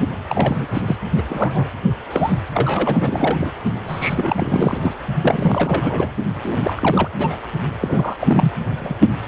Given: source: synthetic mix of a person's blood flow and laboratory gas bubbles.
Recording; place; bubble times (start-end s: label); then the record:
Doppler ultrasound of blood flow; precordium
0.29-0.66 s: bubbles
0.73-0.81 s: bubbles
0.87-0.96 s: bubbles
1.17-1.22 s: bubbles
1.27-1.66 s: bubbles
2.10-2.32 s: bubbles
2.54-3.53 s: bubbles
3.88-4.78 s: bubbles
4.82-4.95 s: bubbles
5.23-6.09 s: bubbles
6.42-7.08 s: bubbles
7.19-7.37 s: bubbles
7.80-8.16 s: bubbles
8.21-8.52 s: bubbles
8.79-8.95 s: bubbles
From the record:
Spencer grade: 3 (all of the cardiac periods contain showers or single bubble signals, but not dominating or overriding the cardiac motion signals); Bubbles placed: only in the low amplitude regions of the cardiac cycle